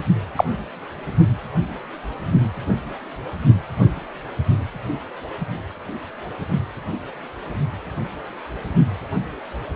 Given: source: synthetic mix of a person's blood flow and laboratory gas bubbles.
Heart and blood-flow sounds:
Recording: Doppler ultrasound of blood flow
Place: precordium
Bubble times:
0.35-0.45 s: bubbles
From the record:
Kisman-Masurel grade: 123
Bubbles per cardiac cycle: 1 to 2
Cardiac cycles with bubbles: 10 to 50%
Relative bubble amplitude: loud (0.450 to 0.775)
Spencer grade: 2 (many but less than half of the cardiac periods contain bubble signals, singularly or in groups)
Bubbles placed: only in the low amplitude regions of the cardiac cycle

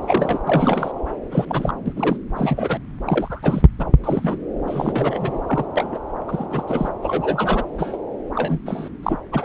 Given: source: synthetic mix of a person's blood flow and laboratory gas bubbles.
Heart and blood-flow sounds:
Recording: Doppler ultrasound of blood flow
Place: subclavian vein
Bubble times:
0.02-0.39 s: bubbles
0.47-0.91 s: bubbles
1.31-1.72 s: bubbles
1.85-1.93 s: bubbles
1.96-2.17 s: bubbles
2.35-2.79 s: bubbles
3.02-3.62 s: bubbles
3.80-3.86 s: bubbles
4.04-4.37 s: bubbles
4.67-5.41 s: bubbles
5.46-5.65 s: bubbles
5.75-5.98 s: bubbles
6.28-6.48 s: bubbles
6.50-6.63 s: bubbles
6.67-6.89 s: bubbles
7.03-7.63 s: bubbles
7.78-7.96 s: bubbles
8.35-8.59 s: bubbles
8.65-8.88 s: bubbles
9.03-9.18 s: bubbles
9.32-9.45 s: bubbles
From the record:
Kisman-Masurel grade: 242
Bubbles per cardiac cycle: several, 3 to 8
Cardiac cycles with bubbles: 100%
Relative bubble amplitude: moderate (0.250 to 0.450)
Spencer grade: 3 (all of the cardiac periods contain showers or single bubble signals, but not dominating or overriding the cardiac motion signals)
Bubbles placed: anywhere in the cardiac cycle

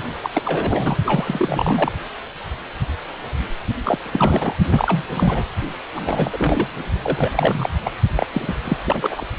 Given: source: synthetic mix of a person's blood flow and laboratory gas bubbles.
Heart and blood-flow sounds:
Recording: Doppler ultrasound of blood flow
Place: precordium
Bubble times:
0.21-0.30 s: bubbles
0.34-0.97 s: bubbles
1.06-1.92 s: bubbles
3.83-3.98 s: bubbles
4.03-4.56 s: bubbles
4.68-5.06 s: bubbles
5.10-5.44 s: bubbles
5.95-6.69 s: bubbles
7.02-7.31 s: bubbles
7.33-7.70 s: bubbles
7.84-7.92 s: bubbles
8.15-8.26 s: bubbles
8.32-8.54 s: bubbles
8.64-8.77 s: bubbles
8.84-9.24 s: bubbles
From the record:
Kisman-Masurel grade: 332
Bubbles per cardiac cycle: rolling drumbeat, 9 or more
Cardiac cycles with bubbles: 50 to 99%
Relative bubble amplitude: moderate (0.250 to 0.450)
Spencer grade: 3 (all of the cardiac periods contain showers or single bubble signals, but not dominating or overriding the cardiac motion signals)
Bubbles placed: only in the low amplitude regions of the cardiac cycle

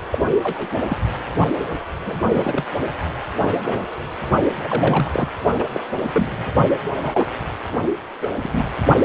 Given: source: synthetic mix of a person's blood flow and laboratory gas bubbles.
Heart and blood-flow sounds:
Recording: Doppler ultrasound of blood flow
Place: precordium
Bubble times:
0.11-0.19 s: bubbles
0.43-0.68 s: bubbles
0.89-0.97 s: bubbles
2.05-2.21 s: bubbles
2.25-2.65 s: bubbles
3.42-3.81 s: bubbles
4.51-5.29 s: bubbles
5.58-5.64 s: bubbles
5.73-5.80 s: bubbles
6.12-6.28 s: bubbles
6.36-6.54 s: bubbles
7.02-7.27 s: bubbles
8.21-8.36 s: bubbles
8.43-8.66 s: bubbles
9.03-9.05 s: bubbles
From the record:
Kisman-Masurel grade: 242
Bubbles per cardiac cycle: several, 3 to 8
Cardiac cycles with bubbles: 100%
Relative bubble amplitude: moderate (0.250 to 0.450)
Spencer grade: 3 (all of the cardiac periods contain showers or single bubble signals, but not dominating or overriding the cardiac motion signals)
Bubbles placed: only in the low amplitude regions of the cardiac cycle

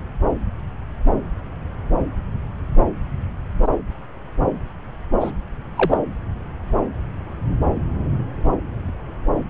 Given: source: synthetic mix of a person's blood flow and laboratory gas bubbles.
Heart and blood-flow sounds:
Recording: Doppler ultrasound of blood flow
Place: subclavian vein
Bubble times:
5.21-5.32 s: bubbles
5.76-5.97 s: bubbles
From the record:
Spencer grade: 1 (occasional bubble signal discernible with the cardiac motion signal, with majority of cardiac periods free of bubbles)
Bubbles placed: anywhere in the cardiac cycle

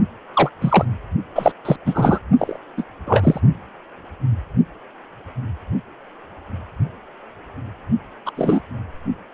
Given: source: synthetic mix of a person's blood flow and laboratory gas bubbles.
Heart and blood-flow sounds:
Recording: Doppler ultrasound of blood flow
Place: precordium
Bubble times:
0.33-0.50 s: bubbles
0.61-0.85 s: bubbles
1.34-1.51 s: bubbles
1.65-1.76 s: bubbles
1.86-2.19 s: bubbles
2.38-2.57 s: bubbles
2.77-2.83 s: bubbles
3.06-3.39 s: bubbles
8.26-8.31 s: bubbles
8.37-8.61 s: bubbles
From the record:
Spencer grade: 3 (all of the cardiac periods contain showers or single bubble signals, but not dominating or overriding the cardiac motion signals)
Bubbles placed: only in the low amplitude regions of the cardiac cycle

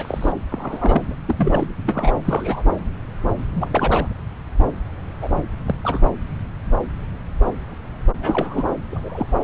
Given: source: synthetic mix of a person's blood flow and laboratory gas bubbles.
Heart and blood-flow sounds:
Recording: Doppler ultrasound of blood flow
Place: subclavian vein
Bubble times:
0.00-0.33 s: bubbles
0.51-1.02 s: bubbles
1.10-1.16 s: bubbles
1.26-1.66 s: bubbles
1.86-2.20 s: bubbles
2.25-2.65 s: bubbles
3.54-4.13 s: bubbles
5.21-5.33 s: bubbles
5.66-5.75 s: bubbles
5.83-5.99 s: bubbles
8.17-8.74 s: bubbles
8.92-9.26 s: bubbles
From the record:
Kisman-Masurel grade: 232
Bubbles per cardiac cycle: several, 3 to 8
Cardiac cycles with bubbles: 50 to 99%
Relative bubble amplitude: moderate (0.250 to 0.450)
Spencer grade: 3 (all of the cardiac periods contain showers or single bubble signals, but not dominating or overriding the cardiac motion signals)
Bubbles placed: anywhere in the cardiac cycle

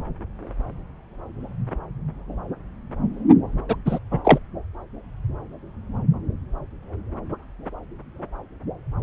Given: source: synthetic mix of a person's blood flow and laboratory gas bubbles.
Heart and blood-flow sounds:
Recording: Doppler ultrasound of blood flow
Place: subclavian vein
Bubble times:
3.68-3.76 s: bubbles
3.85-3.98 s: bubbles
4.11-4.21 s: bubbles
4.24-4.38 s: bubbles
From the record:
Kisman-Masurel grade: 213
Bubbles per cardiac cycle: several, 3 to 8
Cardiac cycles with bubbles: 1 to 10%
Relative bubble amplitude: loud (0.450 to 0.775)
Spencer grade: 1 (occasional bubble signal discernible with the cardiac motion signal, with majority of cardiac periods free of bubbles)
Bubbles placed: anywhere in the cardiac cycle

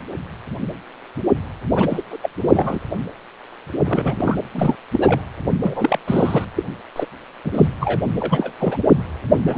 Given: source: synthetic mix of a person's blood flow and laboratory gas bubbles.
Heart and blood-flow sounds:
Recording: Doppler ultrasound of blood flow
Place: precordium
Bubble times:
1.75-2.02 s: bubbles
2.10-2.17 s: bubbles
2.22-2.29 s: bubbles
2.42-2.79 s: bubbles
3.85-4.36 s: bubbles
4.52-4.75 s: bubbles
4.92-5.21 s: bubbles
5.62-5.97 s: bubbles
6.05-6.45 s: bubbles
6.56-6.63 s: bubbles
6.96-7.06 s: bubbles
7.45-7.68 s: bubbles
7.80-8.01 s: bubbles
8.20-8.53 s: bubbles
8.60-8.79 s: bubbles
9.47-9.58 s: bubbles
From the record:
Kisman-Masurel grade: 232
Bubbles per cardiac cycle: several, 3 to 8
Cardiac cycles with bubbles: 50 to 99%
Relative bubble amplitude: moderate (0.250 to 0.450)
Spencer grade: 3 (all of the cardiac periods contain showers or single bubble signals, but not dominating or overriding the cardiac motion signals)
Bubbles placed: anywhere in the cardiac cycle

